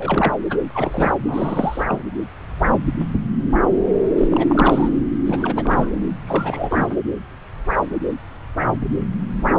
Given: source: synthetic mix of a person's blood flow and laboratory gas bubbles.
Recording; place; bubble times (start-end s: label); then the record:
Doppler ultrasound of blood flow; subclavian vein
0.00-0.34 s: bubbles
0.49-0.57 s: bubbles
0.74-1.13 s: bubbles
1.27-1.83 s: bubbles
1.88-2.03 s: bubbles
4.17-4.27 s: bubbles
4.30-4.89 s: bubbles
5.25-5.91 s: bubbles
6.26-6.96 s: bubbles
From the record:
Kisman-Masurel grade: 332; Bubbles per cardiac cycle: rolling drumbeat, 9 or more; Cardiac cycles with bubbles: 50 to 99%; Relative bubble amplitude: moderate (0.250 to 0.450); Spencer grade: 3 (all of the cardiac periods contain showers or single bubble signals, but not dominating or overriding the cardiac motion signals); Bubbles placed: anywhere in the cardiac cycle